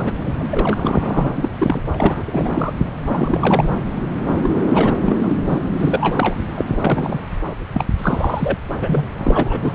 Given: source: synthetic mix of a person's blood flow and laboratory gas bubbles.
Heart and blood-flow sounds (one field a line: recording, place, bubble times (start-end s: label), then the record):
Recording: Doppler ultrasound of blood flow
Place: subclavian vein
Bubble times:
0.00-0.12 s: bubbles
0.17-0.34 s: bubbles
0.39-1.29 s: bubbles
1.35-1.50 s: bubbles
1.58-1.82 s: bubbles
1.93-2.73 s: bubbles
3.00-3.71 s: bubbles
4.43-4.50 s: bubbles
4.73-4.94 s: bubbles
5.06-5.36 s: bubbles
5.46-5.58 s: bubbles
5.79-6.35 s: bubbles
6.57-6.65 s: bubbles
6.68-7.21 s: bubbles
7.73-7.85 s: bubbles
7.98-8.57 s: bubbles
8.80-9.11 s: bubbles
9.18-9.73 s: bubbles
From the record:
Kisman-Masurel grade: 342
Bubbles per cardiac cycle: rolling drumbeat, 9 or more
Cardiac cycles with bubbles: 100%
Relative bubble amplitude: moderate (0.250 to 0.450)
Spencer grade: 3 (all of the cardiac periods contain showers or single bubble signals, but not dominating or overriding the cardiac motion signals)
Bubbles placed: anywhere in the cardiac cycle